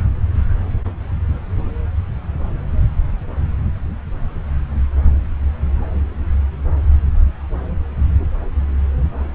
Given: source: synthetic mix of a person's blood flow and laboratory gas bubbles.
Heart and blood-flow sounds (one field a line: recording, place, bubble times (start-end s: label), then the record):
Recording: Doppler ultrasound of blood flow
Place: subclavian vein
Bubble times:
no bubbles
From the record:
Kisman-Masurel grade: 000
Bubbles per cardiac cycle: 0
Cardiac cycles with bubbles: 0%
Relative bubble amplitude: no bubbles discernible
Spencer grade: 0 (complete lack of bubble signals)